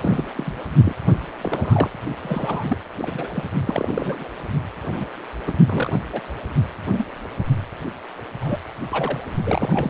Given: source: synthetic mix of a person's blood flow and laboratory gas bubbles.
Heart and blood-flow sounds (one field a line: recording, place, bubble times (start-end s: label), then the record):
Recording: Doppler ultrasound of blood flow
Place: precordium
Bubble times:
0.00-0.25 s: bubbles
0.35-0.53 s: bubbles
0.83-0.95 s: bubbles
1.41-1.90 s: bubbles
2.23-2.78 s: bubbles
2.97-3.28 s: bubbles
3.34-3.44 s: bubbles
3.67-4.28 s: bubbles
4.83-5.05 s: bubbles
5.46-5.52 s: bubbles
5.66-6.00 s: bubbles
6.13-6.21 s: bubbles
6.92-7.07 s: bubbles
8.41-8.58 s: bubbles
8.90-9.19 s: bubbles
9.45-9.90 s: bubbles
From the record:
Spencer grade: 3 (all of the cardiac periods contain showers or single bubble signals, but not dominating or overriding the cardiac motion signals)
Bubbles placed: only in the low amplitude regions of the cardiac cycle